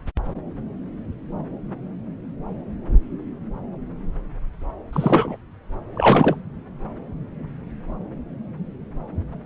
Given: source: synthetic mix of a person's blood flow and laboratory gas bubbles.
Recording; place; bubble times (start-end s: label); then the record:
Doppler ultrasound of blood flow; subclavian vein
4.93-5.37 s: bubbles
5.95-6.41 s: bubbles
From the record:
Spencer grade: 1 (occasional bubble signal discernible with the cardiac motion signal, with majority of cardiac periods free of bubbles); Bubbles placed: anywhere in the cardiac cycle